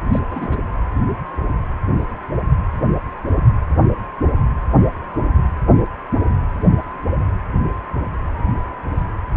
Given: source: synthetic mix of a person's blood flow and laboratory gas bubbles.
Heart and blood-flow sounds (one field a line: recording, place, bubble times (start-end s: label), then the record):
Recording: Doppler ultrasound of blood flow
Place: precordium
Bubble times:
0.12-0.20 s: bubbles
0.30-0.60 s: bubbles
From the record:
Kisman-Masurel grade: 221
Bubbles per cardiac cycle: several, 3 to 8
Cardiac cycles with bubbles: 10 to 50%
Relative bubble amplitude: barely perceptible (0.100 to 0.250)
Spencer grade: 2 (many but less than half of the cardiac periods contain bubble signals, singularly or in groups)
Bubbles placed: anywhere in the cardiac cycle